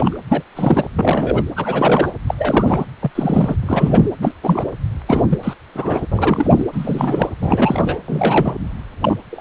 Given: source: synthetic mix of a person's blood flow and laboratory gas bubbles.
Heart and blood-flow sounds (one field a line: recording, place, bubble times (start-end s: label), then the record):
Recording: Doppler ultrasound of blood flow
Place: precordium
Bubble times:
0.00-0.18 s: bubbles
0.28-0.42 s: bubbles
0.55-0.90 s: bubbles
0.98-1.43 s: bubbles
1.55-2.12 s: bubbles
2.26-2.34 s: bubbles
2.38-2.84 s: bubbles
3.00-3.10 s: bubbles
3.15-3.55 s: bubbles
3.62-4.08 s: bubbles
4.21-4.32 s: bubbles
4.43-4.73 s: bubbles
5.06-5.25 s: bubbles
5.28-5.39 s: bubbles
5.43-5.54 s: bubbles
5.74-6.07 s: bubbles
6.11-6.66 s: bubbles
6.72-7.27 s: bubbles
7.41-7.99 s: bubbles
8.07-8.57 s: bubbles
9.02-9.16 s: bubbles
9.31-9.41 s: bubbles
From the record:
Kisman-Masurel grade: 343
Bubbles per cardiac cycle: rolling drumbeat, 9 or more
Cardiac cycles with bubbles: 100%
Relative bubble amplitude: loud (0.450 to 0.775)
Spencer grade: 3 (all of the cardiac periods contain showers or single bubble signals, but not dominating or overriding the cardiac motion signals)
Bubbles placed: anywhere in the cardiac cycle